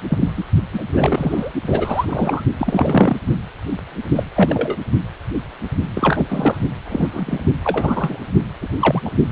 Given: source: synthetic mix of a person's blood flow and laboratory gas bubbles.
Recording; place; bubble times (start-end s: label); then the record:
Doppler ultrasound of blood flow; precordium
0.08-0.32 s: bubbles
0.36-0.44 s: bubbles
0.73-0.83 s: bubbles
0.93-1.51 s: bubbles
1.66-2.43 s: bubbles
2.59-3.17 s: bubbles
4.15-4.23 s: bubbles
4.35-4.76 s: bubbles
5.94-6.58 s: bubbles
6.85-7.43 s: bubbles
7.64-8.29 s: bubbles
8.61-8.68 s: bubbles
8.79-9.02 s: bubbles
9.04-9.12 s: bubbles
From the record:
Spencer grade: 3 (all of the cardiac periods contain showers or single bubble signals, but not dominating or overriding the cardiac motion signals); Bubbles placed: only in the low amplitude regions of the cardiac cycle